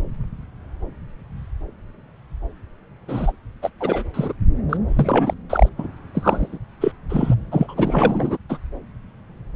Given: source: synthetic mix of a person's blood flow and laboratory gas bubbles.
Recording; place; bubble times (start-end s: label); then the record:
Doppler ultrasound of blood flow; subclavian vein
3.07-3.32 s: bubbles
3.62-3.70 s: bubbles
3.80-4.03 s: bubbles
4.13-4.33 s: bubbles
4.69-4.77 s: bubbles
4.88-5.34 s: bubbles
5.50-5.69 s: bubbles
5.78-5.87 s: bubbles
6.14-6.58 s: bubbles
6.80-6.92 s: bubbles
7.09-7.35 s: bubbles
7.51-8.37 s: bubbles
8.49-8.57 s: bubbles
From the record:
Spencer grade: 3 (all of the cardiac periods contain showers or single bubble signals, but not dominating or overriding the cardiac motion signals); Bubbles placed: anywhere in the cardiac cycle